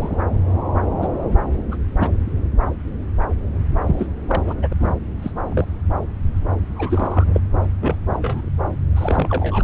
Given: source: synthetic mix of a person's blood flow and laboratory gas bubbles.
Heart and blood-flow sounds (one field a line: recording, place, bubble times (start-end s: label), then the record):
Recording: Doppler ultrasound of blood flow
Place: subclavian vein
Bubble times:
0.00-0.23 s: bubbles
1.01-1.07 s: bubbles
1.71-1.76 s: bubbles
2.00-2.09 s: bubbles
3.87-4.07 s: bubbles
4.28-4.42 s: bubbles
4.47-4.54 s: bubbles
4.62-4.67 s: bubbles
4.71-4.73 s: bubbles
4.79-4.93 s: bubbles
5.22-5.32 s: bubbles
5.52-5.65 s: bubbles
6.76-7.41 s: bubbles
7.81-7.96 s: bubbles
8.13-8.19 s: bubbles
8.22-8.50 s: bubbles
8.96-9.64 s: bubbles
From the record:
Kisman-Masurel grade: 242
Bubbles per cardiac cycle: several, 3 to 8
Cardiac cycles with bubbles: 100%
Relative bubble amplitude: moderate (0.250 to 0.450)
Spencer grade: 3 (all of the cardiac periods contain showers or single bubble signals, but not dominating or overriding the cardiac motion signals)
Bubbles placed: anywhere in the cardiac cycle